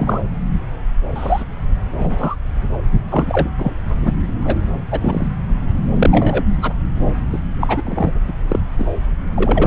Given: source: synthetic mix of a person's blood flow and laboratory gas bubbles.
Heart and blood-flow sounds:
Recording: Doppler ultrasound of blood flow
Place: subclavian vein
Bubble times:
0.00-0.20 s: bubbles
1.15-1.44 s: bubbles
1.99-2.35 s: bubbles
3.07-3.48 s: bubbles
3.57-3.73 s: bubbles
4.02-4.12 s: bubbles
4.43-4.58 s: bubbles
4.91-5.27 s: bubbles
5.96-6.44 s: bubbles
6.62-6.73 s: bubbles
7.33-7.39 s: bubbles
7.60-7.82 s: bubbles
7.85-8.12 s: bubbles
8.27-8.33 s: bubbles
8.48-8.59 s: bubbles
8.78-8.85 s: bubbles
9.35-9.67 s: bubbles
From the record:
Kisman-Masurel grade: 233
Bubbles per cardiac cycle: several, 3 to 8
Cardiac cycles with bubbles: 50 to 99%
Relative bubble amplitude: loud (0.450 to 0.775)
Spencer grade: 3 (all of the cardiac periods contain showers or single bubble signals, but not dominating or overriding the cardiac motion signals)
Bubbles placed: anywhere in the cardiac cycle

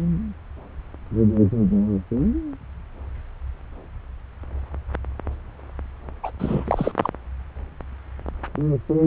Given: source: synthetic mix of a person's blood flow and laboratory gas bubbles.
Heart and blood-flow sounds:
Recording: Doppler ultrasound of blood flow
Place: subclavian vein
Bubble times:
6.23-6.31 s: bubbles
6.39-6.92 s: bubbles
7.02-7.10 s: bubbles
From the record:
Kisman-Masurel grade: 212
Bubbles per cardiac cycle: several, 3 to 8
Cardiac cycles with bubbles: 1 to 10%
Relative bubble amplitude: moderate (0.250 to 0.450)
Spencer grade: 1 (occasional bubble signal discernible with the cardiac motion signal, with majority of cardiac periods free of bubbles)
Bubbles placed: anywhere in the cardiac cycle

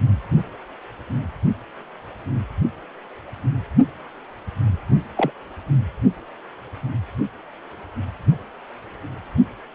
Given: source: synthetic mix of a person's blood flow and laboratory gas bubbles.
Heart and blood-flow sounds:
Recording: Doppler ultrasound of blood flow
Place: precordium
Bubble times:
5.17-5.32 s: bubbles
From the record:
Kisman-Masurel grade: 112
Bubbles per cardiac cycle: 1 to 2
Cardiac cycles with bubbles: 1 to 10%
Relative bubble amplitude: moderate (0.250 to 0.450)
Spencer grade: 1 (occasional bubble signal discernible with the cardiac motion signal, with majority of cardiac periods free of bubbles)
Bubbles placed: only in the low amplitude regions of the cardiac cycle

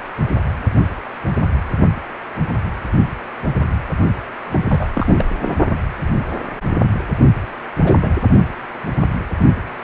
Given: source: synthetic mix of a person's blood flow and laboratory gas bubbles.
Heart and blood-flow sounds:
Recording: Doppler ultrasound of blood flow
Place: precordium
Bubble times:
4.47-4.88 s: bubbles
4.95-5.25 s: bubbles
5.42-5.56 s: bubbles
7.83-8.12 s: bubbles
From the record:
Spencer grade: 2 (many but less than half of the cardiac periods contain bubble signals, singularly or in groups)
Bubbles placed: only in the low amplitude regions of the cardiac cycle

